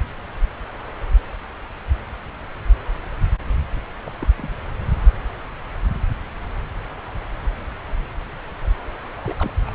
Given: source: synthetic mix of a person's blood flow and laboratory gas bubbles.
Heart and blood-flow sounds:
Doppler ultrasound of blood flow; subclavian vein
4.04-4.13 s: bubbles
4.20-4.27 s: bubbles
4.37-4.56 s: bubbles
9.17-9.21 s: bubbles
9.24-9.34 s: bubbles
9.38-9.53 s: bubbles
9.66-9.71 s: bubbles
From the record:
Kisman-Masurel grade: 221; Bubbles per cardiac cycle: several, 3 to 8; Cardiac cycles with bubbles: 10 to 50%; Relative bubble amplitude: barely perceptible (0.100 to 0.250); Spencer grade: 2 (many but less than half of the cardiac periods contain bubble signals, singularly or in groups); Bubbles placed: anywhere in the cardiac cycle

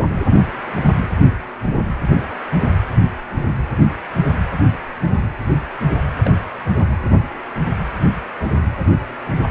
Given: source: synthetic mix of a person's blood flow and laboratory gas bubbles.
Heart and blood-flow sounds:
Doppler ultrasound of blood flow; precordium
6.24-6.31 s: bubbles
From the record:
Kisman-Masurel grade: 111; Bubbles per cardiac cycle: 1 to 2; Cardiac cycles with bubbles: 1 to 10%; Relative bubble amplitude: barely perceptible (0.100 to 0.250); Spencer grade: 1 (occasional bubble signal discernible with the cardiac motion signal, with majority of cardiac periods free of bubbles); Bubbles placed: only in the low amplitude regions of the cardiac cycle

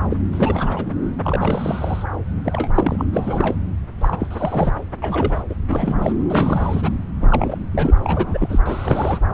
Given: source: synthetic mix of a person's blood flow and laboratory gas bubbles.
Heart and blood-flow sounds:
Doppler ultrasound of blood flow; subclavian vein
0.10-0.17 s: bubbles
0.32-0.92 s: bubbles
1.23-2.04 s: bubbles
2.44-2.70 s: bubbles
2.75-3.05 s: bubbles
3.13-3.55 s: bubbles
4.00-4.73 s: bubbles
5.02-5.43 s: bubbles
5.49-5.54 s: bubbles
5.67-6.12 s: bubbles
6.29-6.90 s: bubbles
7.21-7.58 s: bubbles
7.72-7.94 s: bubbles
8.04-8.59 s: bubbles
8.65-9.19 s: bubbles
9.31-9.34 s: bubbles
From the record:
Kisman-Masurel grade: 342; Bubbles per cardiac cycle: rolling drumbeat, 9 or more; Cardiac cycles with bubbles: 100%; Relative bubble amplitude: moderate (0.250 to 0.450); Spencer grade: 3 (all of the cardiac periods contain showers or single bubble signals, but not dominating or overriding the cardiac motion signals); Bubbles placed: anywhere in the cardiac cycle

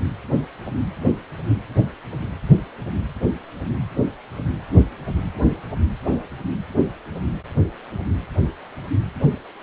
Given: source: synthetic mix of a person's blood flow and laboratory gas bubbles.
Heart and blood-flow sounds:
Doppler ultrasound of blood flow; precordium
no bubbles
From the record:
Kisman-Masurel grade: 000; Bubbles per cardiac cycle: 0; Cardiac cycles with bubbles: 0%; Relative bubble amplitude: no bubbles discernible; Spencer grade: 0 (complete lack of bubble signals)

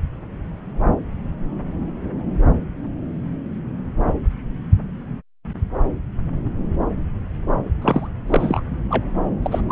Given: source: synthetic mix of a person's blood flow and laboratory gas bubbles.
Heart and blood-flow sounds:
Doppler ultrasound of blood flow; subclavian vein
7.82-8.08 s: bubbles
8.27-8.62 s: bubbles
8.89-9.04 s: bubbles
9.43-9.61 s: bubbles
9.69-9.72 s: bubbles
From the record:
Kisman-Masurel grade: 222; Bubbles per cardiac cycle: several, 3 to 8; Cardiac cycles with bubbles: 10 to 50%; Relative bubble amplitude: moderate (0.250 to 0.450); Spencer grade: 2 (many but less than half of the cardiac periods contain bubble signals, singularly or in groups); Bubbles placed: anywhere in the cardiac cycle

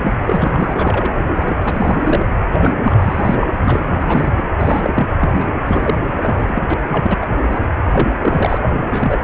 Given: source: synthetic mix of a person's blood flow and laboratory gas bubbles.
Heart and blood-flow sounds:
Doppler ultrasound of blood flow; precordium
0.00-0.14 s: bubbles
0.26-1.12 s: bubbles
1.37-1.55 s: bubbles
1.61-2.26 s: bubbles
2.53-2.73 s: bubbles
2.85-3.37 s: bubbles
3.41-3.47 s: bubbles
3.62-3.88 s: bubbles
4.00-4.50 s: bubbles
4.59-5.08 s: bubbles
5.19-5.30 s: bubbles
5.33-5.51 s: bubbles
5.67-5.94 s: bubbles
6.16-6.62 s: bubbles
6.69-6.74 s: bubbles
6.92-7.18 s: bubbles
7.21-7.38 s: bubbles
7.42-7.67 s: bubbles
7.92-8.14 s: bubbles
8.21-8.58 s: bubbles
8.91-9.17 s: bubbles
From the record:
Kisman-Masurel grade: 342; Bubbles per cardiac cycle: rolling drumbeat, 9 or more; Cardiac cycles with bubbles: 100%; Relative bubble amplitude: moderate (0.250 to 0.450); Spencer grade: 3 (all of the cardiac periods contain showers or single bubble signals, but not dominating or overriding the cardiac motion signals); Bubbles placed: anywhere in the cardiac cycle

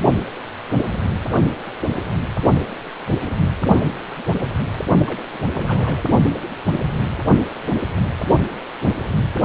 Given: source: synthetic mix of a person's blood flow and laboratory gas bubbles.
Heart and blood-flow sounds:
Doppler ultrasound of blood flow; precordium
5.07-5.21 s: bubbles
5.34-5.38 s: bubbles
5.52-6.06 s: bubbles
From the record:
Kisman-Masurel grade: 211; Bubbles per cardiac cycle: several, 3 to 8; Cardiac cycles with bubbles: 1 to 10%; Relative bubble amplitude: barely perceptible (0.100 to 0.250); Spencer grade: 1 (occasional bubble signal discernible with the cardiac motion signal, with majority of cardiac periods free of bubbles); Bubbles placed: only in the low amplitude regions of the cardiac cycle

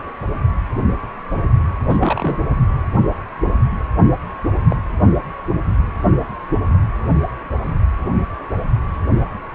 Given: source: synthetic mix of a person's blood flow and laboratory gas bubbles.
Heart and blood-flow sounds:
Doppler ultrasound of blood flow; precordium
1.89-2.36 s: bubbles
4.68-4.76 s: bubbles
From the record:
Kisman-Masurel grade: 122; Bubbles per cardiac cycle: 1 to 2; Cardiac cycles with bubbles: 10 to 50%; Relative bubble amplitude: moderate (0.250 to 0.450); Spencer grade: 2 (many but less than half of the cardiac periods contain bubble signals, singularly or in groups); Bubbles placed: only in the low amplitude regions of the cardiac cycle

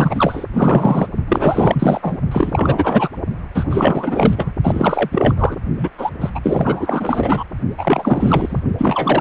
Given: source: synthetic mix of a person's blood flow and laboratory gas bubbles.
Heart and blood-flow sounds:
Doppler ultrasound of blood flow; precordium
0.00-0.46 s: bubbles
0.53-1.07 s: bubbles
1.28-2.17 s: bubbles
2.31-3.08 s: bubbles
3.54-3.66 s: bubbles
3.70-4.53 s: bubbles
4.64-5.34 s: bubbles
5.37-5.57 s: bubbles
5.78-5.90 s: bubbles
5.98-6.10 s: bubbles
6.20-6.31 s: bubbles
6.35-6.40 s: bubbles
6.43-7.44 s: bubbles
7.77-8.62 s: bubbles
8.77-9.21 s: bubbles
From the record:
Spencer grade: 4 (maximum detectable bubble signal sounding continuously throughout systole and diastole of every cardiac period, and overriding the amplitude of the normal cardiac signals); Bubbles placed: only in the low amplitude regions of the cardiac cycle

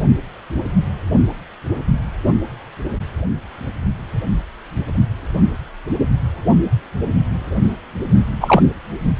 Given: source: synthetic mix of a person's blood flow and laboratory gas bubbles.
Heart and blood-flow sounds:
Doppler ultrasound of blood flow; precordium
8.40-8.62 s: bubbles
From the record:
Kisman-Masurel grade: 123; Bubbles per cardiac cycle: 1 to 2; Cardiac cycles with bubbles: 10 to 50%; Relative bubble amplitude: loud (0.450 to 0.775); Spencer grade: 2 (many but less than half of the cardiac periods contain bubble signals, singularly or in groups); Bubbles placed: only in the low amplitude regions of the cardiac cycle

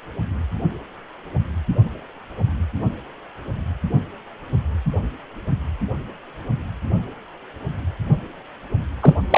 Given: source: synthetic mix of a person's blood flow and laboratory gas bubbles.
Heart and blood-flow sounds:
Doppler ultrasound of blood flow; precordium
9.01-9.14 s: bubbles
9.30-9.38 s: bubbles
From the record:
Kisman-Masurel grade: 113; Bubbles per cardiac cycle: 1 to 2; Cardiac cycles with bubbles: 1 to 10%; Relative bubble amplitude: loud (0.450 to 0.775); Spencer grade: 1 (occasional bubble signal discernible with the cardiac motion signal, with majority of cardiac periods free of bubbles); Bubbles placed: only in the low amplitude regions of the cardiac cycle

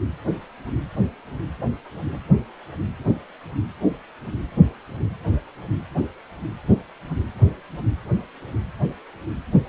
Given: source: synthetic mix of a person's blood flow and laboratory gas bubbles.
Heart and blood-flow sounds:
Doppler ultrasound of blood flow; precordium
no bubbles
From the record:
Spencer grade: 0 (complete lack of bubble signals)

